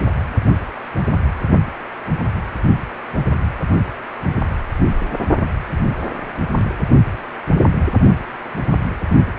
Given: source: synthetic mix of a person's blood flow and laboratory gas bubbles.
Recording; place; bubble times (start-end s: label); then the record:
Doppler ultrasound of blood flow; precordium
no bubbles
From the record:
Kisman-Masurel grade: 000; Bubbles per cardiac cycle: 0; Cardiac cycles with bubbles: 0%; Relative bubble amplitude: no bubbles discernible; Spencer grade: 0 (complete lack of bubble signals)